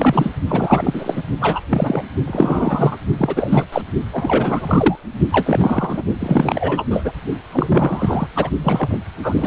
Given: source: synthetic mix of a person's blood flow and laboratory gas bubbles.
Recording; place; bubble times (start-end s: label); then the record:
Doppler ultrasound of blood flow; precordium
0.00-0.30 s: bubbles
0.47-1.24 s: bubbles
1.40-1.61 s: bubbles
1.69-2.02 s: bubbles
2.27-2.96 s: bubbles
3.18-3.65 s: bubbles
3.72-3.81 s: bubbles
4.13-5.00 s: bubbles
5.32-6.04 s: bubbles
6.20-6.85 s: bubbles
6.90-7.12 s: bubbles
7.52-8.28 s: bubbles
8.35-8.50 s: bubbles
8.63-8.99 s: bubbles
9.22-9.47 s: bubbles
From the record:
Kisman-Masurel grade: 333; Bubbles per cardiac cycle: rolling drumbeat, 9 or more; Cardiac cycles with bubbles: 50 to 99%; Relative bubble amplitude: loud (0.450 to 0.775); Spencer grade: 3 (all of the cardiac periods contain showers or single bubble signals, but not dominating or overriding the cardiac motion signals); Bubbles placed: only in the low amplitude regions of the cardiac cycle